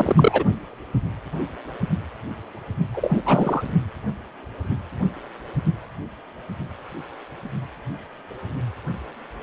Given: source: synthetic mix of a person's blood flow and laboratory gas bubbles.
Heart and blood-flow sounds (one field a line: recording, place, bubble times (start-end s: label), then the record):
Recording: Doppler ultrasound of blood flow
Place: precordium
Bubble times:
0.00-0.44 s: bubbles
2.94-3.22 s: bubbles
3.26-3.63 s: bubbles
From the record:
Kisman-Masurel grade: 222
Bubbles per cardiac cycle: several, 3 to 8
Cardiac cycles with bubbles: 10 to 50%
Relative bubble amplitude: moderate (0.250 to 0.450)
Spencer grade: 2 (many but less than half of the cardiac periods contain bubble signals, singularly or in groups)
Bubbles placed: only in the low amplitude regions of the cardiac cycle